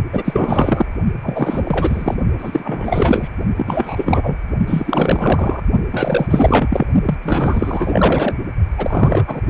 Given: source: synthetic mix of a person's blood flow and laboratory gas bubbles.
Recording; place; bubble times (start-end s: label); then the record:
Doppler ultrasound of blood flow; precordium
0.12-0.86 s: bubbles
1.23-2.16 s: bubbles
2.38-3.29 s: bubbles
3.56-4.38 s: bubbles
4.67-5.61 s: bubbles
5.91-6.26 s: bubbles
6.29-6.85 s: bubbles
7.05-7.15 s: bubbles
7.22-8.35 s: bubbles
8.77-9.41 s: bubbles
9.46-9.50 s: bubbles
From the record:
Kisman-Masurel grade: 444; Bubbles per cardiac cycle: continuous sound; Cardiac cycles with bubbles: 100%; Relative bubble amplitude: maximal (0.775 to 0.999); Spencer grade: 4 (maximum detectable bubble signal sounding continuously throughout systole and diastole of every cardiac period, and overriding the amplitude of the normal cardiac signals); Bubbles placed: only in the low amplitude regions of the cardiac cycle